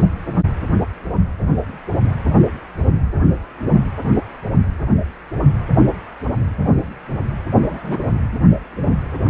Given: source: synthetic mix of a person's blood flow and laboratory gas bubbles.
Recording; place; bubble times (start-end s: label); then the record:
Doppler ultrasound of blood flow; precordium
7.69-7.97 s: bubbles
From the record:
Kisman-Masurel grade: 112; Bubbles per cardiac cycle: 1 to 2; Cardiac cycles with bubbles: 1 to 10%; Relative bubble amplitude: moderate (0.250 to 0.450); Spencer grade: 1 (occasional bubble signal discernible with the cardiac motion signal, with majority of cardiac periods free of bubbles); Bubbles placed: only in the low amplitude regions of the cardiac cycle